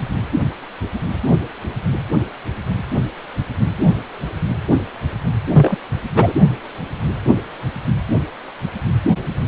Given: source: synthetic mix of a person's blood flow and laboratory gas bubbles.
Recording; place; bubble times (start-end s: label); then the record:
Doppler ultrasound of blood flow; precordium
5.53-5.76 s: bubbles
6.16-6.33 s: bubbles
From the record:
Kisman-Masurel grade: 113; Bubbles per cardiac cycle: 1 to 2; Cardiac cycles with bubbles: 1 to 10%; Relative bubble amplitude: loud (0.450 to 0.775); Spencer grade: 1 (occasional bubble signal discernible with the cardiac motion signal, with majority of cardiac periods free of bubbles); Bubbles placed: anywhere in the cardiac cycle